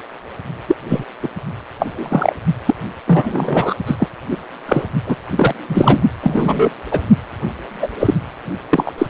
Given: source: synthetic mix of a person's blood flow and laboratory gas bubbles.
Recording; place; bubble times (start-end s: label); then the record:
Doppler ultrasound of blood flow; precordium
0.68-0.75 s: bubbles
0.88-1.05 s: bubbles
1.22-1.29 s: bubbles
1.79-2.34 s: bubbles
2.65-2.74 s: bubbles
3.05-3.74 s: bubbles
3.86-3.96 s: bubbles
3.99-4.09 s: bubbles
4.30-4.37 s: bubbles
4.66-4.83 s: bubbles
5.06-5.16 s: bubbles
5.31-5.54 s: bubbles
5.69-6.00 s: bubbles
6.21-6.70 s: bubbles
6.91-7.00 s: bubbles
7.81-7.88 s: bubbles
8.00-8.14 s: bubbles
8.70-8.93 s: bubbles
8.98-9.06 s: bubbles
From the record:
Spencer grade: 3 (all of the cardiac periods contain showers or single bubble signals, but not dominating or overriding the cardiac motion signals); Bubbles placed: only in the low amplitude regions of the cardiac cycle